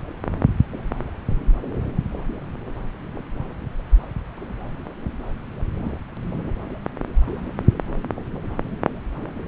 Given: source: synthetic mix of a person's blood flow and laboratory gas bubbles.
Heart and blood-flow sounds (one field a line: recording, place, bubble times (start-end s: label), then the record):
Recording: Doppler ultrasound of blood flow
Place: subclavian vein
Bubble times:
no bubbles
From the record:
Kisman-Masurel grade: 000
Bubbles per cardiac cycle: 0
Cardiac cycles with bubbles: 0%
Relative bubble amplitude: no bubbles discernible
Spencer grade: 0 (complete lack of bubble signals)